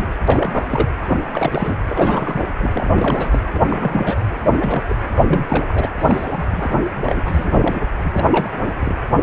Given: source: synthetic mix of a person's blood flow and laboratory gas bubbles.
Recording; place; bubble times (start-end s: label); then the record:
Doppler ultrasound of blood flow; precordium
0.00-0.06 s: bubbles
0.28-0.89 s: bubbles
0.99-1.17 s: bubbles
1.33-1.76 s: bubbles
1.89-2.46 s: bubbles
2.58-2.71 s: bubbles
2.75-2.90 s: bubbles
2.95-3.46 s: bubbles
3.54-4.21 s: bubbles
4.30-4.96 s: bubbles
5.15-5.88 s: bubbles
6.00-6.44 s: bubbles
6.50-6.77 s: bubbles
7.01-7.22 s: bubbles
7.25-7.81 s: bubbles
8.03-8.29 s: bubbles
8.31-8.58 s: bubbles
8.61-8.73 s: bubbles
8.80-8.94 s: bubbles
From the record:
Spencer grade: 3 (all of the cardiac periods contain showers or single bubble signals, but not dominating or overriding the cardiac motion signals); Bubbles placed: anywhere in the cardiac cycle